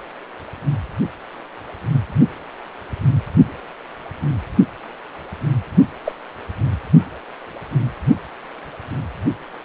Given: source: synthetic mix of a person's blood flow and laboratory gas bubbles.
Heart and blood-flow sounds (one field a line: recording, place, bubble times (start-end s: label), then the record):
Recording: Doppler ultrasound of blood flow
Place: precordium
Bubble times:
6.05-6.12 s: bubbles
From the record:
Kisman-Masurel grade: 112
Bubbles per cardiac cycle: 1 to 2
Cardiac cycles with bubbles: 1 to 10%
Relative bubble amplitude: moderate (0.250 to 0.450)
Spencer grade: 1 (occasional bubble signal discernible with the cardiac motion signal, with majority of cardiac periods free of bubbles)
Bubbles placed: anywhere in the cardiac cycle